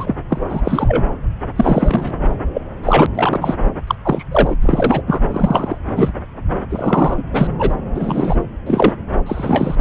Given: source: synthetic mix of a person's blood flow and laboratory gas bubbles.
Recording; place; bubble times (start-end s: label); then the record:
Doppler ultrasound of blood flow; subclavian vein
0.00-0.15 s: bubbles
0.29-0.41 s: bubbles
0.49-1.06 s: bubbles
1.56-2.13 s: bubbles
2.54-2.61 s: bubbles
2.83-3.06 s: bubbles
3.15-3.54 s: bubbles
3.87-3.95 s: bubbles
4.04-4.24 s: bubbles
4.31-4.56 s: bubbles
4.62-5.03 s: bubbles
5.07-5.20 s: bubbles
5.31-5.78 s: bubbles
5.96-6.12 s: bubbles
6.70-7.23 s: bubbles
7.32-7.47 s: bubbles
7.58-7.74 s: bubbles
7.94-8.36 s: bubbles
8.66-8.93 s: bubbles
9.26-9.76 s: bubbles
From the record:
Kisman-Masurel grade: 243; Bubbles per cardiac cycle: several, 3 to 8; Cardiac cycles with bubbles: 100%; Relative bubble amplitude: loud (0.450 to 0.775); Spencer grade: 3 (all of the cardiac periods contain showers or single bubble signals, but not dominating or overriding the cardiac motion signals); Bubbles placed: anywhere in the cardiac cycle